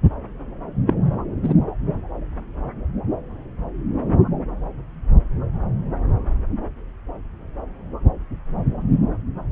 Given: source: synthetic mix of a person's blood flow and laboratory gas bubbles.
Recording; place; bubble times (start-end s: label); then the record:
Doppler ultrasound of blood flow; subclavian vein
0.87-0.94 s: bubbles
1.43-1.54 s: bubbles
From the record:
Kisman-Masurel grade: 113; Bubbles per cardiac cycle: 1 to 2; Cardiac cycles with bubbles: 1 to 10%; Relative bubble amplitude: loud (0.450 to 0.775); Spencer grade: 1 (occasional bubble signal discernible with the cardiac motion signal, with majority of cardiac periods free of bubbles); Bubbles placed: anywhere in the cardiac cycle